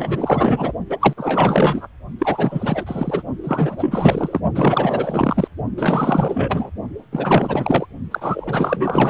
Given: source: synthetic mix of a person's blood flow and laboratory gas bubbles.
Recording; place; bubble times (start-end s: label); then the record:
Doppler ultrasound of blood flow; precordium
0.00-0.73 s: bubbles
0.89-0.97 s: bubbles
1.00-1.14 s: bubbles
1.17-1.87 s: bubbles
2.19-3.23 s: bubbles
3.44-4.41 s: bubbles
4.55-5.48 s: bubbles
5.78-6.71 s: bubbles
7.12-7.87 s: bubbles
8.11-9.10 s: bubbles
From the record:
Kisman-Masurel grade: 444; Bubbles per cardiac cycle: continuous sound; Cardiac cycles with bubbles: 100%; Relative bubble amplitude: maximal (0.775 to 0.999); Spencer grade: 4 (maximum detectable bubble signal sounding continuously throughout systole and diastole of every cardiac period, and overriding the amplitude of the normal cardiac signals); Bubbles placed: only in the low amplitude regions of the cardiac cycle